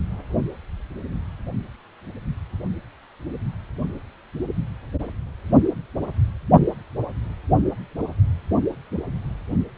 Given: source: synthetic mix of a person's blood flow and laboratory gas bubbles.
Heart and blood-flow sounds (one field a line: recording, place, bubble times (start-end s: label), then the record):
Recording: Doppler ultrasound of blood flow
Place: precordium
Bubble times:
no bubbles
From the record:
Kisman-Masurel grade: 000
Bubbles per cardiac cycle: 0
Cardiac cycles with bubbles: 0%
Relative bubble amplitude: no bubbles discernible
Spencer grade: 0 (complete lack of bubble signals)